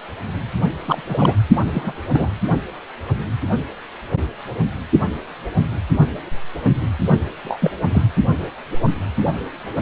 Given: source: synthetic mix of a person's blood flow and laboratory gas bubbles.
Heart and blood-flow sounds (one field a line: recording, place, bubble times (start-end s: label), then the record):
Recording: Doppler ultrasound of blood flow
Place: precordium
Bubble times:
0.87-1.02 s: bubbles
1.08-1.36 s: bubbles
1.74-1.92 s: bubbles
2.12-2.30 s: bubbles
7.45-7.72 s: bubbles
7.92-8.02 s: bubbles
From the record:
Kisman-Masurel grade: 222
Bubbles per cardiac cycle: several, 3 to 8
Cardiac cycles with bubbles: 10 to 50%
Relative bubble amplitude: moderate (0.250 to 0.450)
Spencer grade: 2 (many but less than half of the cardiac periods contain bubble signals, singularly or in groups)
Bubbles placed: only in the low amplitude regions of the cardiac cycle